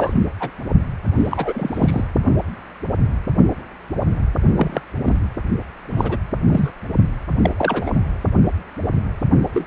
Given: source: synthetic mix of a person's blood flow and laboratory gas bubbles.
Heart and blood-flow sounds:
Doppler ultrasound of blood flow; precordium
0.00-0.22 s: bubbles
0.39-0.50 s: bubbles
1.19-2.04 s: bubbles
4.57-4.82 s: bubbles
5.05-5.16 s: bubbles
5.90-6.19 s: bubbles
6.48-6.70 s: bubbles
7.42-7.51 s: bubbles
7.57-8.02 s: bubbles
9.54-9.65 s: bubbles
From the record:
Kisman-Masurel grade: 232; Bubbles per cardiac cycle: several, 3 to 8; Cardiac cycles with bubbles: 50 to 99%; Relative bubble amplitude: moderate (0.250 to 0.450); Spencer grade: 3 (all of the cardiac periods contain showers or single bubble signals, but not dominating or overriding the cardiac motion signals); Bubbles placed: only in the low amplitude regions of the cardiac cycle

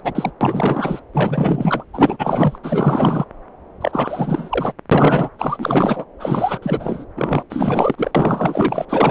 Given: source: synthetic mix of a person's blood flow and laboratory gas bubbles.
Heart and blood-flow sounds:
Doppler ultrasound of blood flow; subclavian vein
0.04-0.31 s: bubbles
0.41-1.01 s: bubbles
1.14-1.84 s: bubbles
1.93-2.58 s: bubbles
2.63-3.25 s: bubbles
3.80-4.72 s: bubbles
4.91-5.30 s: bubbles
5.38-6.05 s: bubbles
6.20-6.59 s: bubbles
6.62-7.05 s: bubbles
7.17-7.43 s: bubbles
7.50-8.11 s: bubbles
8.14-8.85 s: bubbles
8.89-9.11 s: bubbles
From the record:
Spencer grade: 4 (maximum detectable bubble signal sounding continuously throughout systole and diastole of every cardiac period, and overriding the amplitude of the normal cardiac signals); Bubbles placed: anywhere in the cardiac cycle

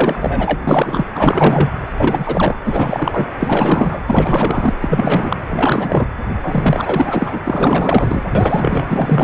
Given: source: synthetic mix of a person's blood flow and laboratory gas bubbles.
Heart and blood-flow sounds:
Doppler ultrasound of blood flow; precordium
0.00-0.60 s: bubbles
0.67-1.05 s: bubbles
1.14-1.69 s: bubbles
1.94-2.55 s: bubbles
2.64-3.25 s: bubbles
3.40-4.00 s: bubbles
4.06-4.74 s: bubbles
4.80-5.37 s: bubbles
5.49-6.07 s: bubbles
6.42-7.40 s: bubbles
7.44-8.23 s: bubbles
8.35-8.86 s: bubbles
8.89-9.24 s: bubbles
From the record:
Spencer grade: 4 (maximum detectable bubble signal sounding continuously throughout systole and diastole of every cardiac period, and overriding the amplitude of the normal cardiac signals); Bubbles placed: anywhere in the cardiac cycle

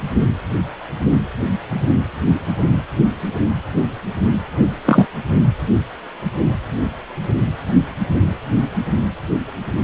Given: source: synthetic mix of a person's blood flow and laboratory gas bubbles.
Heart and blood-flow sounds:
Doppler ultrasound of blood flow; precordium
4.86-5.07 s: bubbles
From the record:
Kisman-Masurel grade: 123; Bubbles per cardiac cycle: 1 to 2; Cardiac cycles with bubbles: 10 to 50%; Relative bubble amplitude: loud (0.450 to 0.775); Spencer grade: 2 (many but less than half of the cardiac periods contain bubble signals, singularly or in groups); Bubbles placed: only in the low amplitude regions of the cardiac cycle

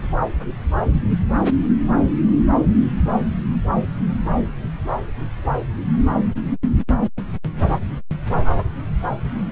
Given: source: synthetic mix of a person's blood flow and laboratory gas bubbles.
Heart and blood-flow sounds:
Doppler ultrasound of blood flow; subclavian vein
no bubbles
From the record:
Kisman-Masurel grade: 000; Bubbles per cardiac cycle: 0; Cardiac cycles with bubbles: 0%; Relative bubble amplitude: no bubbles discernible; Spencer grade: 0 (complete lack of bubble signals)

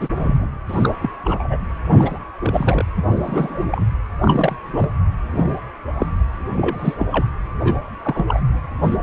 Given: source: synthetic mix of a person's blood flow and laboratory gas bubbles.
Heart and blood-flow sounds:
Doppler ultrasound of blood flow; precordium
0.00-0.09 s: bubbles
0.15-0.51 s: bubbles
0.69-0.94 s: bubbles
1.01-1.10 s: bubbles
1.24-1.57 s: bubbles
1.90-2.18 s: bubbles
2.42-2.85 s: bubbles
2.96-3.04 s: bubbles
3.08-3.64 s: bubbles
3.71-3.82 s: bubbles
4.21-4.56 s: bubbles
4.64-4.90 s: bubbles
5.32-5.59 s: bubbles
5.97-6.06 s: bubbles
6.48-6.96 s: bubbles
6.99-7.08 s: bubbles
7.12-7.26 s: bubbles
7.60-7.78 s: bubbles
8.04-8.24 s: bubbles
8.27-8.41 s: bubbles
8.82-8.96 s: bubbles
From the record:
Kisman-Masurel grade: 243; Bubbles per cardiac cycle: several, 3 to 8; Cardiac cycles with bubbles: 100%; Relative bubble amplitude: loud (0.450 to 0.775); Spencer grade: 3 (all of the cardiac periods contain showers or single bubble signals, but not dominating or overriding the cardiac motion signals); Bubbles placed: anywhere in the cardiac cycle

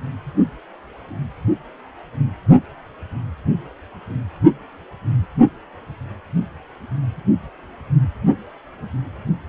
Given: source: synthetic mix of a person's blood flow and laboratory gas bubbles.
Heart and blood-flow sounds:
Doppler ultrasound of blood flow; precordium
no bubbles
From the record:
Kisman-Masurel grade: 000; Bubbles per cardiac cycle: 0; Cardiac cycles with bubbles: 0%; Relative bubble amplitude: no bubbles discernible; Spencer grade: 0 (complete lack of bubble signals)

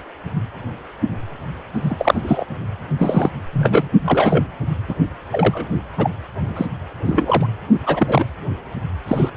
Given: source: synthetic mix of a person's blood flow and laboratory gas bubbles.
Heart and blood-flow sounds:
Doppler ultrasound of blood flow; precordium
1.73-1.96 s: bubbles
1.98-2.44 s: bubbles
2.98-3.29 s: bubbles
3.52-3.88 s: bubbles
4.04-4.45 s: bubbles
4.88-4.95 s: bubbles
5.30-5.76 s: bubbles
5.97-6.11 s: bubbles
6.56-6.66 s: bubbles
7.04-7.46 s: bubbles
7.85-8.25 s: bubbles
9.07-9.31 s: bubbles
From the record:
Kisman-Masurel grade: 233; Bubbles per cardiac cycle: several, 3 to 8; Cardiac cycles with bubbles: 50 to 99%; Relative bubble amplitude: loud (0.450 to 0.775); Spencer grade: 3 (all of the cardiac periods contain showers or single bubble signals, but not dominating or overriding the cardiac motion signals); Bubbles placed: only in the low amplitude regions of the cardiac cycle

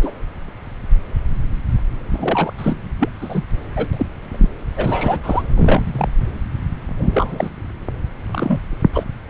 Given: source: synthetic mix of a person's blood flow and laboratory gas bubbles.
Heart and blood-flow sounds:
Doppler ultrasound of blood flow; subclavian vein
0.00-0.11 s: bubbles
2.12-2.52 s: bubbles
2.58-2.77 s: bubbles
2.99-3.09 s: bubbles
3.21-3.44 s: bubbles
3.77-3.87 s: bubbles
3.93-4.06 s: bubbles
4.31-4.48 s: bubbles
4.76-5.42 s: bubbles
5.55-6.08 s: bubbles
6.98-7.50 s: bubbles
8.34-8.62 s: bubbles
8.93-9.04 s: bubbles
From the record:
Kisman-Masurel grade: 232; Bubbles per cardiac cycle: several, 3 to 8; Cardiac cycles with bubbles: 50 to 99%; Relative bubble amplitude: moderate (0.250 to 0.450); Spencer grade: 3 (all of the cardiac periods contain showers or single bubble signals, but not dominating or overriding the cardiac motion signals); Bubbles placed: anywhere in the cardiac cycle

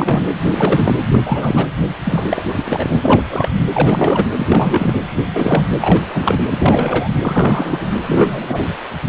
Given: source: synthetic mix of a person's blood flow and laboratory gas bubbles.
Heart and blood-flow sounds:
Doppler ultrasound of blood flow; precordium
0.00-0.25 s: bubbles
0.49-0.99 s: bubbles
1.13-1.18 s: bubbles
1.25-1.67 s: bubbles
2.05-2.23 s: bubbles
2.29-2.42 s: bubbles
2.55-3.21 s: bubbles
3.29-3.49 s: bubbles
3.73-4.25 s: bubbles
4.37-4.98 s: bubbles
5.18-5.23 s: bubbles
5.34-5.64 s: bubbles
5.81-6.02 s: bubbles
6.13-6.43 s: bubbles
6.52-7.15 s: bubbles
7.21-7.92 s: bubbles
8.02-8.70 s: bubbles
From the record:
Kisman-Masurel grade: 342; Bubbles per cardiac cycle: rolling drumbeat, 9 or more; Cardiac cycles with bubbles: 100%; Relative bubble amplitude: moderate (0.250 to 0.450); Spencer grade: 3 (all of the cardiac periods contain showers or single bubble signals, but not dominating or overriding the cardiac motion signals); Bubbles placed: anywhere in the cardiac cycle

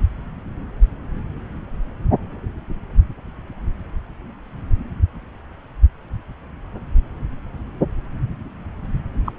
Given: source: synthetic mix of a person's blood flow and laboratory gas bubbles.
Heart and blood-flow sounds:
Doppler ultrasound of blood flow; subclavian vein
9.26-9.33 s: bubbles
From the record:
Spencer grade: 1 (occasional bubble signal discernible with the cardiac motion signal, with majority of cardiac periods free of bubbles); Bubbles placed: anywhere in the cardiac cycle

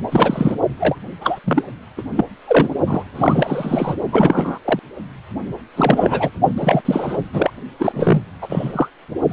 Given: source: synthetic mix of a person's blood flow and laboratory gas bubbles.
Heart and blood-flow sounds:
Doppler ultrasound of blood flow; precordium
0.11-0.56 s: bubbles
0.79-0.95 s: bubbles
1.21-1.40 s: bubbles
1.44-1.64 s: bubbles
1.97-2.02 s: bubbles
2.15-2.25 s: bubbles
2.48-2.73 s: bubbles
2.87-3.03 s: bubbles
3.15-3.95 s: bubbles
4.12-4.58 s: bubbles
4.64-4.79 s: bubbles
5.76-6.30 s: bubbles
6.58-6.81 s: bubbles
6.85-7.17 s: bubbles
7.33-7.50 s: bubbles
7.79-8.21 s: bubbles
8.41-8.88 s: bubbles
9.29-9.33 s: bubbles
From the record:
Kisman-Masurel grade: 343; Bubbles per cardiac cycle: rolling drumbeat, 9 or more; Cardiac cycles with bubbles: 100%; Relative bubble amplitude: loud (0.450 to 0.775); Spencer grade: 3 (all of the cardiac periods contain showers or single bubble signals, but not dominating or overriding the cardiac motion signals); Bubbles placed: only in the low amplitude regions of the cardiac cycle

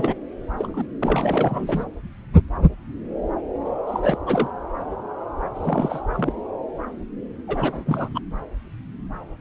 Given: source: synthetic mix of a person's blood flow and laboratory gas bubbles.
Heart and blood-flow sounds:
Doppler ultrasound of blood flow; subclavian vein
0.00-0.14 s: bubbles
0.57-0.85 s: bubbles
1.02-1.85 s: bubbles
3.65-3.69 s: bubbles
3.87-4.18 s: bubbles
4.26-4.50 s: bubbles
5.54-6.02 s: bubbles
6.13-6.33 s: bubbles
7.48-8.20 s: bubbles
From the record:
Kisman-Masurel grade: 332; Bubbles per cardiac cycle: rolling drumbeat, 9 or more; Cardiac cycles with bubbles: 50 to 99%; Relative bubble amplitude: moderate (0.250 to 0.450); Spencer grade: 3 (all of the cardiac periods contain showers or single bubble signals, but not dominating or overriding the cardiac motion signals); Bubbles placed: anywhere in the cardiac cycle

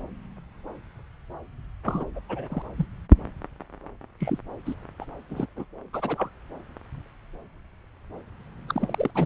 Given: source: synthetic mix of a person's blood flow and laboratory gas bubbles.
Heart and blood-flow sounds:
Doppler ultrasound of blood flow; subclavian vein
1.86-2.04 s: bubbles
2.15-2.19 s: bubbles
2.29-2.62 s: bubbles
2.77-2.85 s: bubbles
4.20-4.38 s: bubbles
4.65-4.75 s: bubbles
5.00-5.05 s: bubbles
5.30-5.46 s: bubbles
5.56-5.65 s: bubbles
5.93-6.29 s: bubbles
8.69-9.11 s: bubbles
9.14-9.26 s: bubbles
From the record:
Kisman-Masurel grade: 221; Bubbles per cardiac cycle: several, 3 to 8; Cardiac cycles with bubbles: 10 to 50%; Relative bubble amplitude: barely perceptible (0.100 to 0.250); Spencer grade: 2 (many but less than half of the cardiac periods contain bubble signals, singularly or in groups); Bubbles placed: anywhere in the cardiac cycle

